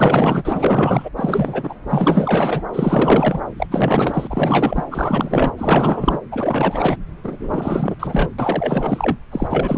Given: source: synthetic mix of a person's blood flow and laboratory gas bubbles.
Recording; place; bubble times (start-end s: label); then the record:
Doppler ultrasound of blood flow; subclavian vein
0.00-1.09 s: bubbles
1.16-1.75 s: bubbles
1.89-2.61 s: bubbles
2.72-3.41 s: bubbles
3.57-3.67 s: bubbles
3.71-4.84 s: bubbles
4.91-5.51 s: bubbles
5.58-6.18 s: bubbles
6.31-6.96 s: bubbles
7.24-7.95 s: bubbles
8.00-8.30 s: bubbles
8.38-9.17 s: bubbles
9.32-9.78 s: bubbles
From the record:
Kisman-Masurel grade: 444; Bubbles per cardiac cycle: continuous sound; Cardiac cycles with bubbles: 100%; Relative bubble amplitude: maximal (0.775 to 0.999); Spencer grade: 4 (maximum detectable bubble signal sounding continuously throughout systole and diastole of every cardiac period, and overriding the amplitude of the normal cardiac signals); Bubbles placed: anywhere in the cardiac cycle